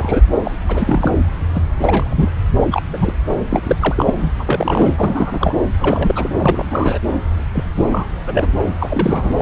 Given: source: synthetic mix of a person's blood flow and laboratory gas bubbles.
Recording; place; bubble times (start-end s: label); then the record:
Doppler ultrasound of blood flow; subclavian vein
0.00-0.22 s: bubbles
0.44-0.57 s: bubbles
0.68-1.13 s: bubbles
1.55-1.60 s: bubbles
1.81-2.29 s: bubbles
2.54-2.82 s: bubbles
2.93-3.14 s: bubbles
3.49-3.76 s: bubbles
3.80-4.14 s: bubbles
4.17-4.30 s: bubbles
4.39-4.94 s: bubbles
4.97-5.55 s: bubbles
5.80-6.30 s: bubbles
6.38-6.99 s: bubbles
7.53-7.64 s: bubbles
7.75-8.11 s: bubbles
8.26-8.53 s: bubbles
8.58-8.63 s: bubbles
8.79-9.34 s: bubbles
9.37-9.42 s: bubbles
From the record:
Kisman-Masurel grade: 342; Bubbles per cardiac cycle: rolling drumbeat, 9 or more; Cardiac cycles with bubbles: 100%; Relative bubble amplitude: moderate (0.250 to 0.450); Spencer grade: 3 (all of the cardiac periods contain showers or single bubble signals, but not dominating or overriding the cardiac motion signals); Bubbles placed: anywhere in the cardiac cycle